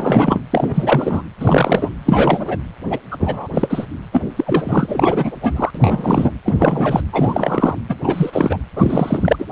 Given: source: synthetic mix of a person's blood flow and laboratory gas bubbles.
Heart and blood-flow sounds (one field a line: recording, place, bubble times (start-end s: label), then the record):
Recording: Doppler ultrasound of blood flow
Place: precordium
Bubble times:
0.00-0.40 s: bubbles
0.51-1.23 s: bubbles
1.40-1.91 s: bubbles
2.05-2.57 s: bubbles
2.90-2.99 s: bubbles
3.11-3.17 s: bubbles
3.19-3.47 s: bubbles
3.53-3.86 s: bubbles
4.12-4.21 s: bubbles
4.36-5.71 s: bubbles
5.74-6.31 s: bubbles
6.45-7.00 s: bubbles
7.12-7.75 s: bubbles
7.88-7.96 s: bubbles
8.04-8.60 s: bubbles
8.76-9.46 s: bubbles
From the record:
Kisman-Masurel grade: 333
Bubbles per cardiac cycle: rolling drumbeat, 9 or more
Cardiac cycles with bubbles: 50 to 99%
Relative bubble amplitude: loud (0.450 to 0.775)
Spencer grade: 3 (all of the cardiac periods contain showers or single bubble signals, but not dominating or overriding the cardiac motion signals)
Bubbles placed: anywhere in the cardiac cycle